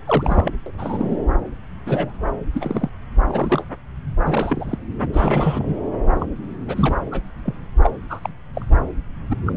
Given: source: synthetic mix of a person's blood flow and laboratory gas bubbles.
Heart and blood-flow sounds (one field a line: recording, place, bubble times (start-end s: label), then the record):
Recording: Doppler ultrasound of blood flow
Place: subclavian vein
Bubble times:
0.05-0.52 s: bubbles
0.66-0.71 s: bubbles
0.78-1.18 s: bubbles
1.85-2.12 s: bubbles
2.25-2.30 s: bubbles
2.54-2.90 s: bubbles
3.27-3.65 s: bubbles
4.25-4.79 s: bubbles
5.13-5.78 s: bubbles
6.17-6.25 s: bubbles
6.67-6.96 s: bubbles
7.11-7.23 s: bubbles
7.43-7.67 s: bubbles
7.83-7.90 s: bubbles
8.10-8.20 s: bubbles
8.22-8.29 s: bubbles
8.54-8.65 s: bubbles
9.30-9.37 s: bubbles
9.46-9.53 s: bubbles
From the record:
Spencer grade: 3 (all of the cardiac periods contain showers or single bubble signals, but not dominating or overriding the cardiac motion signals)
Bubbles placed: anywhere in the cardiac cycle